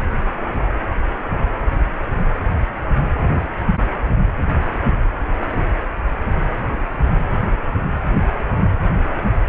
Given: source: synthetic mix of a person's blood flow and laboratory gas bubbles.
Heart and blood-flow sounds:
Doppler ultrasound of blood flow; precordium
no bubbles
From the record:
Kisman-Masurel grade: 000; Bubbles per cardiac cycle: 0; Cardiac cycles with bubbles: 0%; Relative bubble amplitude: no bubbles discernible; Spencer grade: 0 (complete lack of bubble signals)

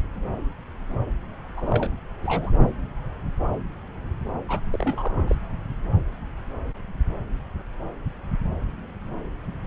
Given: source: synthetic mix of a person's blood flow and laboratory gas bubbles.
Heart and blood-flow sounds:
Doppler ultrasound of blood flow; subclavian vein
1.57-1.90 s: bubbles
2.22-2.51 s: bubbles
4.49-4.60 s: bubbles
4.72-5.36 s: bubbles
From the record:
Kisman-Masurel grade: 222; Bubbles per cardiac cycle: several, 3 to 8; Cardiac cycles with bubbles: 10 to 50%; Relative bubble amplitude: moderate (0.250 to 0.450); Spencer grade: 2 (many but less than half of the cardiac periods contain bubble signals, singularly or in groups); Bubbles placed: anywhere in the cardiac cycle

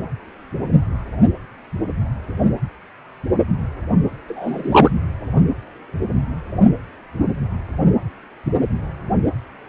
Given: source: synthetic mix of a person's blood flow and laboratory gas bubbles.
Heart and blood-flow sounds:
Doppler ultrasound of blood flow; precordium
4.28-4.91 s: bubbles
From the record:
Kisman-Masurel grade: 113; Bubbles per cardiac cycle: 1 to 2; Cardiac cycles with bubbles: 1 to 10%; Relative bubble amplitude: loud (0.450 to 0.775); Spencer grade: 1 (occasional bubble signal discernible with the cardiac motion signal, with majority of cardiac periods free of bubbles); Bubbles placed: anywhere in the cardiac cycle

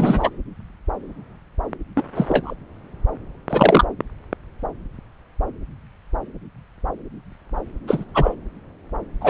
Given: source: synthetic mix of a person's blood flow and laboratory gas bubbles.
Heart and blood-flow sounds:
Doppler ultrasound of blood flow; subclavian vein
0.00-0.30 s: bubbles
1.96-2.04 s: bubbles
2.15-2.54 s: bubbles
3.50-3.85 s: bubbles
7.87-8.04 s: bubbles
8.14-8.35 s: bubbles
9.21-9.30 s: bubbles
From the record:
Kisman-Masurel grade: 223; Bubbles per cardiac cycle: several, 3 to 8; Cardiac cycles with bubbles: 10 to 50%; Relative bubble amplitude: loud (0.450 to 0.775); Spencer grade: 2 (many but less than half of the cardiac periods contain bubble signals, singularly or in groups); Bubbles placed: anywhere in the cardiac cycle

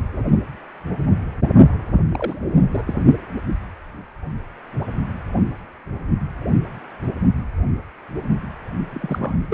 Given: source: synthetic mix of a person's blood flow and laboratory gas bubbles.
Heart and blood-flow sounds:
Doppler ultrasound of blood flow; precordium
2.09-2.42 s: bubbles
2.71-2.94 s: bubbles
8.91-9.46 s: bubbles
9.50-9.54 s: bubbles
From the record:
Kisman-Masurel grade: 222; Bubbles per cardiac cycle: several, 3 to 8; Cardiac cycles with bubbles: 10 to 50%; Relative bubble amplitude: moderate (0.250 to 0.450); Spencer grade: 2 (many but less than half of the cardiac periods contain bubble signals, singularly or in groups); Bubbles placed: only in the low amplitude regions of the cardiac cycle

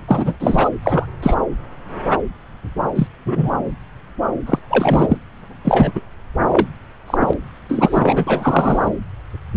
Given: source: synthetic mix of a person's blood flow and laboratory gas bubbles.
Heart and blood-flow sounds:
Doppler ultrasound of blood flow; subclavian vein
0.07-0.33 s: bubbles
0.40-0.69 s: bubbles
0.82-1.08 s: bubbles
1.22-1.35 s: bubbles
2.95-3.07 s: bubbles
3.25-3.49 s: bubbles
4.46-4.59 s: bubbles
4.70-5.18 s: bubbles
5.64-5.92 s: bubbles
5.95-6.02 s: bubbles
6.44-6.67 s: bubbles
7.07-7.33 s: bubbles
7.69-8.91 s: bubbles
From the record:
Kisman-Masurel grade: 233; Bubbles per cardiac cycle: several, 3 to 8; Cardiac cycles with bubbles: 50 to 99%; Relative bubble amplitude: loud (0.450 to 0.775); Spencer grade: 3 (all of the cardiac periods contain showers or single bubble signals, but not dominating or overriding the cardiac motion signals); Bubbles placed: anywhere in the cardiac cycle

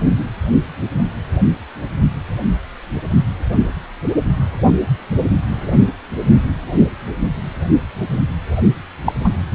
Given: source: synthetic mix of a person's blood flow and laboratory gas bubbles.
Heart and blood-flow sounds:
Doppler ultrasound of blood flow; precordium
9.05-9.12 s: bubbles
9.24-9.29 s: bubbles
From the record:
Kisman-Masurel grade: 113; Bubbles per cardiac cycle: 1 to 2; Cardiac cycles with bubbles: 1 to 10%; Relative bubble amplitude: loud (0.450 to 0.775); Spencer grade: 1 (occasional bubble signal discernible with the cardiac motion signal, with majority of cardiac periods free of bubbles); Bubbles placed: anywhere in the cardiac cycle

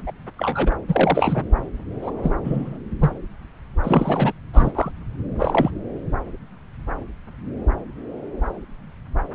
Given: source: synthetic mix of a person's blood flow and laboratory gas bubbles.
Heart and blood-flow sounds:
Doppler ultrasound of blood flow; subclavian vein
0.07-0.12 s: bubbles
0.37-0.76 s: bubbles
0.88-1.43 s: bubbles
2.02-2.11 s: bubbles
2.23-2.34 s: bubbles
2.44-2.78 s: bubbles
3.00-3.11 s: bubbles
3.83-4.32 s: bubbles
4.53-4.92 s: bubbles
5.39-5.71 s: bubbles
From the record:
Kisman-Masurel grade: 233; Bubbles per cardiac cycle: several, 3 to 8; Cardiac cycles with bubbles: 50 to 99%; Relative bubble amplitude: loud (0.450 to 0.775); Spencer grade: 3 (all of the cardiac periods contain showers or single bubble signals, but not dominating or overriding the cardiac motion signals); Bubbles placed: anywhere in the cardiac cycle

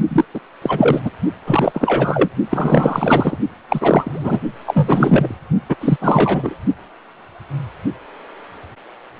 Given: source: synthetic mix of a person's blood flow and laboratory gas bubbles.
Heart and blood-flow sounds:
Doppler ultrasound of blood flow; precordium
0.08-0.24 s: bubbles
0.34-0.40 s: bubbles
0.61-1.00 s: bubbles
1.04-1.10 s: bubbles
1.46-2.29 s: bubbles
2.49-3.39 s: bubbles
3.68-4.39 s: bubbles
4.66-5.38 s: bubbles
5.69-5.75 s: bubbles
5.80-5.96 s: bubbles
6.00-6.55 s: bubbles
From the record:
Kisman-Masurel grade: 333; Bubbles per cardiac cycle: rolling drumbeat, 9 or more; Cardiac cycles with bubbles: 50 to 99%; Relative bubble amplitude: loud (0.450 to 0.775); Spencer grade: 3 (all of the cardiac periods contain showers or single bubble signals, but not dominating or overriding the cardiac motion signals); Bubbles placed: only in the low amplitude regions of the cardiac cycle

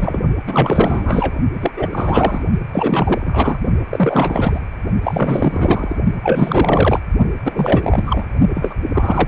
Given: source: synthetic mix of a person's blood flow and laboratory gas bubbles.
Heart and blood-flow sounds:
Doppler ultrasound of blood flow; precordium
0.00-0.20 s: bubbles
0.47-1.38 s: bubbles
1.53-1.71 s: bubbles
1.77-2.44 s: bubbles
2.72-3.59 s: bubbles
3.90-4.59 s: bubbles
5.03-5.98 s: bubbles
6.23-7.01 s: bubbles
7.45-8.25 s: bubbles
8.54-8.73 s: bubbles
8.94-9.28 s: bubbles
From the record:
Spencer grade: 4 (maximum detectable bubble signal sounding continuously throughout systole and diastole of every cardiac period, and overriding the amplitude of the normal cardiac signals); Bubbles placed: only in the low amplitude regions of the cardiac cycle

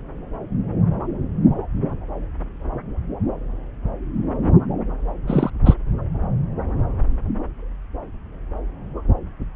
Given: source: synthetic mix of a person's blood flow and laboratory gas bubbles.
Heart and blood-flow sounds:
Doppler ultrasound of blood flow; subclavian vein
5.27-5.50 s: bubbles
5.65-5.75 s: bubbles
From the record:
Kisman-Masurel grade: 213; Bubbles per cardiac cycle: several, 3 to 8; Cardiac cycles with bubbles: 1 to 10%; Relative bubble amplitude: loud (0.450 to 0.775); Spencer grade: 1 (occasional bubble signal discernible with the cardiac motion signal, with majority of cardiac periods free of bubbles); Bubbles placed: anywhere in the cardiac cycle

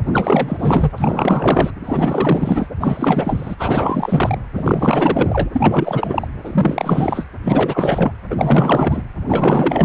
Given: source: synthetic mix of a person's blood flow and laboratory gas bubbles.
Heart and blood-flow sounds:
Doppler ultrasound of blood flow; precordium
0.04-0.92 s: bubbles
0.96-1.70 s: bubbles
1.84-2.69 s: bubbles
2.80-3.55 s: bubbles
3.59-4.38 s: bubbles
4.53-5.50 s: bubbles
5.55-6.28 s: bubbles
6.45-7.26 s: bubbles
7.42-8.12 s: bubbles
8.30-9.03 s: bubbles
9.27-9.85 s: bubbles
From the record:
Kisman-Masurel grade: 444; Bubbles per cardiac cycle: continuous sound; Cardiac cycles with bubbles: 100%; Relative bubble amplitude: maximal (0.775 to 0.999); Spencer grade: 4 (maximum detectable bubble signal sounding continuously throughout systole and diastole of every cardiac period, and overriding the amplitude of the normal cardiac signals); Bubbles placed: anywhere in the cardiac cycle

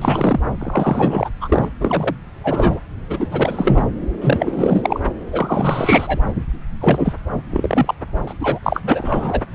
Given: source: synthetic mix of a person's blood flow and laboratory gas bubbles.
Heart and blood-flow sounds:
Doppler ultrasound of blood flow; subclavian vein
0.00-0.40 s: bubbles
0.59-1.30 s: bubbles
1.41-1.69 s: bubbles
1.80-2.15 s: bubbles
2.44-2.79 s: bubbles
3.09-3.27 s: bubbles
3.31-3.90 s: bubbles
4.20-5.00 s: bubbles
5.32-6.23 s: bubbles
6.81-7.13 s: bubbles
7.50-7.94 s: bubbles
8.27-8.33 s: bubbles
8.40-8.59 s: bubbles
8.62-9.41 s: bubbles
9.53-9.55 s: bubbles
From the record:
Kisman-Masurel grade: 343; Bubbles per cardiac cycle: rolling drumbeat, 9 or more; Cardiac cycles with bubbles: 100%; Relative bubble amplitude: loud (0.450 to 0.775); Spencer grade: 3 (all of the cardiac periods contain showers or single bubble signals, but not dominating or overriding the cardiac motion signals); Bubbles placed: anywhere in the cardiac cycle

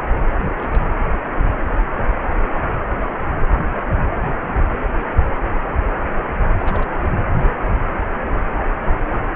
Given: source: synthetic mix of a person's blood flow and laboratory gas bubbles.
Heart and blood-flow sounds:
Doppler ultrasound of blood flow; precordium
0.37-0.84 s: bubbles
6.58-6.90 s: bubbles
7.01-7.11 s: bubbles
From the record:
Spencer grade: 1 (occasional bubble signal discernible with the cardiac motion signal, with majority of cardiac periods free of bubbles); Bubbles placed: anywhere in the cardiac cycle

